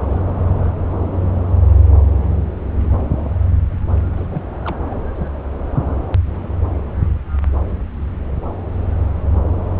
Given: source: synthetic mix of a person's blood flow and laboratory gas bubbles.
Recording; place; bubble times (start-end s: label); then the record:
Doppler ultrasound of blood flow; subclavian vein
0.10-0.18 s: bubbles
3.70-3.76 s: bubbles
4.17-4.25 s: bubbles
4.29-4.43 s: bubbles
4.65-4.77 s: bubbles
4.90-4.99 s: bubbles
5.15-5.28 s: bubbles
From the record:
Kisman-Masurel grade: 221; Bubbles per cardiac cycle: several, 3 to 8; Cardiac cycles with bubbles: 10 to 50%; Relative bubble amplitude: barely perceptible (0.100 to 0.250); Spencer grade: 2 (many but less than half of the cardiac periods contain bubble signals, singularly or in groups); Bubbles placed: anywhere in the cardiac cycle